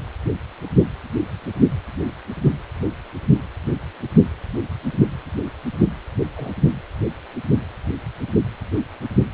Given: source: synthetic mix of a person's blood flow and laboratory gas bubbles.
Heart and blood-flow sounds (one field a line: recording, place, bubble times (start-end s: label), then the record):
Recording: Doppler ultrasound of blood flow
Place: precordium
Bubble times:
2.84-2.90 s: bubbles
6.37-6.55 s: bubbles
6.59-6.62 s: bubbles
6.66-6.72 s: bubbles
From the record:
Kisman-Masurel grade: 111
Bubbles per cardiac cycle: 1 to 2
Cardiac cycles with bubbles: 1 to 10%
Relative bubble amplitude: barely perceptible (0.100 to 0.250)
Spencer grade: 1 (occasional bubble signal discernible with the cardiac motion signal, with majority of cardiac periods free of bubbles)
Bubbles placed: anywhere in the cardiac cycle